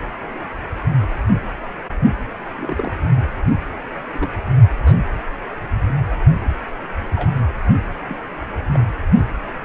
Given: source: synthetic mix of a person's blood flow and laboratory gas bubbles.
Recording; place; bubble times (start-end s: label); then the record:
Doppler ultrasound of blood flow; precordium
2.58-2.92 s: bubbles
4.13-4.28 s: bubbles
4.85-5.01 s: bubbles
7.15-7.29 s: bubbles
8.08-8.16 s: bubbles
8.74-8.80 s: bubbles
From the record:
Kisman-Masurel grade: 121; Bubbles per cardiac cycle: 1 to 2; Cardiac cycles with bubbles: 10 to 50%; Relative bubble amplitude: barely perceptible (0.100 to 0.250); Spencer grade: 2 (many but less than half of the cardiac periods contain bubble signals, singularly or in groups); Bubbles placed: anywhere in the cardiac cycle